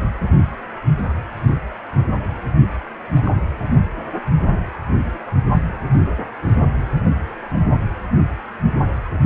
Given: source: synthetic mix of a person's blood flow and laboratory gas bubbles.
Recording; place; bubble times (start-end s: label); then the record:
Doppler ultrasound of blood flow; precordium
3.16-3.31 s: bubbles
From the record:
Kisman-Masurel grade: 121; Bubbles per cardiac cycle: 1 to 2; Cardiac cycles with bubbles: 10 to 50%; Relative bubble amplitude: barely perceptible (0.100 to 0.250); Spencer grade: 2 (many but less than half of the cardiac periods contain bubble signals, singularly or in groups); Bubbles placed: only in the low amplitude regions of the cardiac cycle